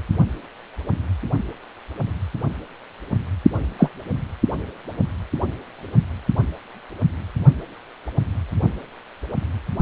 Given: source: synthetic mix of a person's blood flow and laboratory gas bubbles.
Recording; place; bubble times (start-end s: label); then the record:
Doppler ultrasound of blood flow; precordium
3.78-3.90 s: bubbles
From the record:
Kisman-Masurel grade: 113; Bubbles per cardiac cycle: 1 to 2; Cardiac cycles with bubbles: 1 to 10%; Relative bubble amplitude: loud (0.450 to 0.775); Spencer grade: 1 (occasional bubble signal discernible with the cardiac motion signal, with majority of cardiac periods free of bubbles); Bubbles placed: only in the low amplitude regions of the cardiac cycle